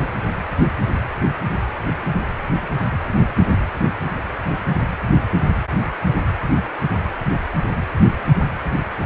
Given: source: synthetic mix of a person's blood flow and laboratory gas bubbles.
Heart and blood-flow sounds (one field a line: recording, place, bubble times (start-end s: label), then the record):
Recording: Doppler ultrasound of blood flow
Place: precordium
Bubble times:
no bubbles
From the record:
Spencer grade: 0 (complete lack of bubble signals)